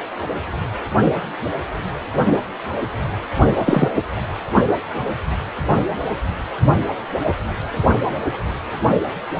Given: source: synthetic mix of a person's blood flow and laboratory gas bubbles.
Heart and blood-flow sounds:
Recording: Doppler ultrasound of blood flow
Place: precordium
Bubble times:
3.58-3.90 s: bubbles
3.96-4.03 s: bubbles
From the record:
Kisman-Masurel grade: 223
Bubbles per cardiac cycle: several, 3 to 8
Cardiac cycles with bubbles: 10 to 50%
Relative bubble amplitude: loud (0.450 to 0.775)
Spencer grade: 2 (many but less than half of the cardiac periods contain bubble signals, singularly or in groups)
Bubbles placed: only in the low amplitude regions of the cardiac cycle

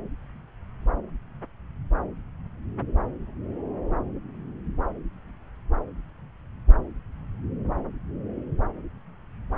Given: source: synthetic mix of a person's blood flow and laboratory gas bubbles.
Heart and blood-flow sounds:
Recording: Doppler ultrasound of blood flow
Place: subclavian vein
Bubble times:
no bubbles
From the record:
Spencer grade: 0 (complete lack of bubble signals)

